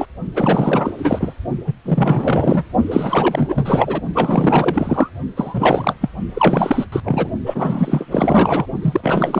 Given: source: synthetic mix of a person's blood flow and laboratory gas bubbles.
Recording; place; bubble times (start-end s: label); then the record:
Doppler ultrasound of blood flow; precordium
0.00-0.06 s: bubbles
0.34-0.92 s: bubbles
0.98-1.33 s: bubbles
1.66-1.74 s: bubbles
1.85-2.64 s: bubbles
2.91-4.01 s: bubbles
4.14-5.10 s: bubbles
5.36-5.94 s: bubbles
6.00-6.09 s: bubbles
6.33-6.86 s: bubbles
6.92-7.00 s: bubbles
7.03-7.30 s: bubbles
7.46-8.06 s: bubbles
8.11-8.66 s: bubbles
8.81-9.40 s: bubbles
From the record:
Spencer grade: 4 (maximum detectable bubble signal sounding continuously throughout systole and diastole of every cardiac period, and overriding the amplitude of the normal cardiac signals); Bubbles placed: only in the low amplitude regions of the cardiac cycle